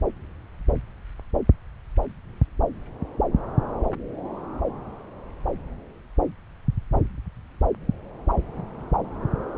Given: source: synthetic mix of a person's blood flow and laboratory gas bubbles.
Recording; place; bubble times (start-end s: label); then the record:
Doppler ultrasound of blood flow; subclavian vein
no bubbles
From the record:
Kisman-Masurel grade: 000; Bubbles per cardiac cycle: 0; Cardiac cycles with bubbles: 0%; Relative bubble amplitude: no bubbles discernible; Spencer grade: 0 (complete lack of bubble signals)